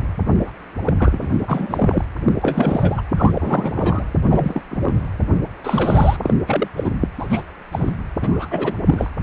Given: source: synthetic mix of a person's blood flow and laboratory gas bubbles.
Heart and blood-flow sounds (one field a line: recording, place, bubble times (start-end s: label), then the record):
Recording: Doppler ultrasound of blood flow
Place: precordium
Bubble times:
0.39-0.51 s: bubbles
0.84-0.93 s: bubbles
0.99-1.43 s: bubbles
1.48-2.04 s: bubbles
2.26-2.33 s: bubbles
2.42-3.02 s: bubbles
3.17-4.04 s: bubbles
4.28-4.62 s: bubbles
4.71-4.93 s: bubbles
5.64-6.17 s: bubbles
6.22-6.36 s: bubbles
6.47-6.68 s: bubbles
6.76-6.91 s: bubbles
7.19-7.42 s: bubbles
7.72-7.95 s: bubbles
8.21-8.48 s: bubbles
8.51-8.73 s: bubbles
8.86-9.10 s: bubbles
From the record:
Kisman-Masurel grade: 242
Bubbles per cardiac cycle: several, 3 to 8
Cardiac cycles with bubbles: 100%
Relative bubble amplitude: moderate (0.250 to 0.450)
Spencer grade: 3 (all of the cardiac periods contain showers or single bubble signals, but not dominating or overriding the cardiac motion signals)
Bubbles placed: anywhere in the cardiac cycle